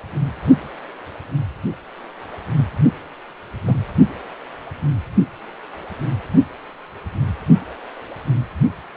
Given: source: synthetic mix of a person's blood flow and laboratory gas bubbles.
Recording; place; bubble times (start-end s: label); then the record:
Doppler ultrasound of blood flow; precordium
3.67-3.75 s: bubbles
From the record:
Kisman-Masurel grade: 112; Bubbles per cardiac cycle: 1 to 2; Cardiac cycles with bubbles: 1 to 10%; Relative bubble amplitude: moderate (0.250 to 0.450); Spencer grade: 1 (occasional bubble signal discernible with the cardiac motion signal, with majority of cardiac periods free of bubbles); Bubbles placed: only in the low amplitude regions of the cardiac cycle